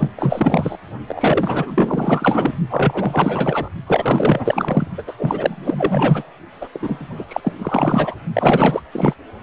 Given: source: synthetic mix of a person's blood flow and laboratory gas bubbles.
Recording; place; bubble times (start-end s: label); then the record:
Doppler ultrasound of blood flow; precordium
0.00-0.08 s: bubbles
0.16-0.77 s: bubbles
1.07-2.55 s: bubbles
2.69-3.69 s: bubbles
3.87-4.88 s: bubbles
4.97-5.02 s: bubbles
5.06-5.14 s: bubbles
5.18-6.28 s: bubbles
6.60-6.68 s: bubbles
6.72-7.25 s: bubbles
7.29-8.15 s: bubbles
8.33-8.80 s: bubbles
8.92-9.14 s: bubbles
From the record:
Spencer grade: 4 (maximum detectable bubble signal sounding continuously throughout systole and diastole of every cardiac period, and overriding the amplitude of the normal cardiac signals); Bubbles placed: only in the low amplitude regions of the cardiac cycle